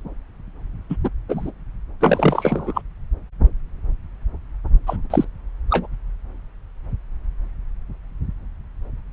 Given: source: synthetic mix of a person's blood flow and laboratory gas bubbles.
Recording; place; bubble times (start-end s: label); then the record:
Doppler ultrasound of blood flow; subclavian vein
0.89-0.96 s: bubbles
1.04-1.09 s: bubbles
1.29-1.51 s: bubbles
2.00-2.81 s: bubbles
4.87-4.96 s: bubbles
5.10-5.25 s: bubbles
5.70-5.87 s: bubbles
From the record:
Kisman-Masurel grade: 223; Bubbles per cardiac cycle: several, 3 to 8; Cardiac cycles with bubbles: 10 to 50%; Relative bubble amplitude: loud (0.450 to 0.775); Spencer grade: 2 (many but less than half of the cardiac periods contain bubble signals, singularly or in groups); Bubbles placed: anywhere in the cardiac cycle